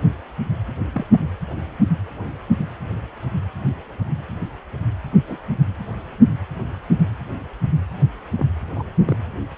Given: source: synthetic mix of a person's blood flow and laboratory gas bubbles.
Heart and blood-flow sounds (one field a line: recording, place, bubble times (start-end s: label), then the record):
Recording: Doppler ultrasound of blood flow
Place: precordium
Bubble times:
0.93-1.06 s: bubbles
5.27-5.37 s: bubbles
8.38-8.46 s: bubbles
8.75-8.84 s: bubbles
8.98-9.17 s: bubbles
From the record:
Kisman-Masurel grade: 121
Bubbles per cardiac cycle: 1 to 2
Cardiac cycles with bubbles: 10 to 50%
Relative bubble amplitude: barely perceptible (0.100 to 0.250)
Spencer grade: 2 (many but less than half of the cardiac periods contain bubble signals, singularly or in groups)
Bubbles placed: anywhere in the cardiac cycle